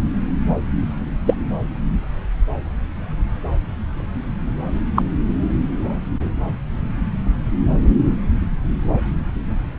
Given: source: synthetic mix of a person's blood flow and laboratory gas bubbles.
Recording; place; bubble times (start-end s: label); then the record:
Doppler ultrasound of blood flow; subclavian vein
1.26-1.34 s: bubbles
4.96-5.03 s: bubbles
From the record:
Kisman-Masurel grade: 123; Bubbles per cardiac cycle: 1 to 2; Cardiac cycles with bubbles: 10 to 50%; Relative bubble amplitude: loud (0.450 to 0.775); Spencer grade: 2 (many but less than half of the cardiac periods contain bubble signals, singularly or in groups); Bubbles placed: anywhere in the cardiac cycle